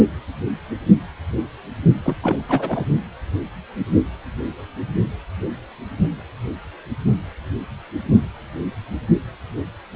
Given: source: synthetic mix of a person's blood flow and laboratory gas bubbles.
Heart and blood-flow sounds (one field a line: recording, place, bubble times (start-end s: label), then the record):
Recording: Doppler ultrasound of blood flow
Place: precordium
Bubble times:
2.03-2.16 s: bubbles
2.23-2.44 s: bubbles
2.48-2.85 s: bubbles
From the record:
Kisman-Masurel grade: 212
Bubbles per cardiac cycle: several, 3 to 8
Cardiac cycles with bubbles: 1 to 10%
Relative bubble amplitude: moderate (0.250 to 0.450)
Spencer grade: 1 (occasional bubble signal discernible with the cardiac motion signal, with majority of cardiac periods free of bubbles)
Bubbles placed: only in the low amplitude regions of the cardiac cycle